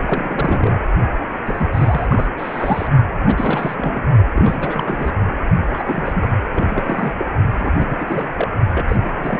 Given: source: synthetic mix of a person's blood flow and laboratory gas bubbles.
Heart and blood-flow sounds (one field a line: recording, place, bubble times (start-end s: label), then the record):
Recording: Doppler ultrasound of blood flow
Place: precordium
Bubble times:
0.00-0.77 s: bubbles
1.46-1.70 s: bubbles
1.73-2.27 s: bubbles
2.38-2.88 s: bubbles
3.25-4.07 s: bubbles
4.35-5.12 s: bubbles
5.70-6.29 s: bubbles
6.51-6.65 s: bubbles
6.69-7.14 s: bubbles
7.18-7.25 s: bubbles
7.58-7.71 s: bubbles
7.78-8.27 s: bubbles
8.37-8.48 s: bubbles
8.73-9.12 s: bubbles
9.19-9.39 s: bubbles
From the record:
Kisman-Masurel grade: 342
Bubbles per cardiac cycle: rolling drumbeat, 9 or more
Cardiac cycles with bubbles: 100%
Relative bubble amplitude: moderate (0.250 to 0.450)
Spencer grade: 3 (all of the cardiac periods contain showers or single bubble signals, but not dominating or overriding the cardiac motion signals)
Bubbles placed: only in the low amplitude regions of the cardiac cycle